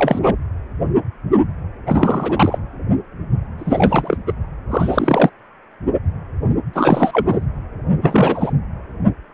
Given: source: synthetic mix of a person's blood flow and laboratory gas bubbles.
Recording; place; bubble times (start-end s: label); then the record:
Doppler ultrasound of blood flow; precordium
0.00-0.20 s: bubbles
0.23-0.36 s: bubbles
1.86-2.58 s: bubbles
3.58-4.17 s: bubbles
4.26-4.33 s: bubbles
4.71-5.29 s: bubbles
6.73-7.48 s: bubbles
8.01-8.52 s: bubbles
From the record:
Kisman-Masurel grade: 333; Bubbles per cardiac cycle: rolling drumbeat, 9 or more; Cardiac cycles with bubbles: 50 to 99%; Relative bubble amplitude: loud (0.450 to 0.775); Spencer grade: 3 (all of the cardiac periods contain showers or single bubble signals, but not dominating or overriding the cardiac motion signals); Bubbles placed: anywhere in the cardiac cycle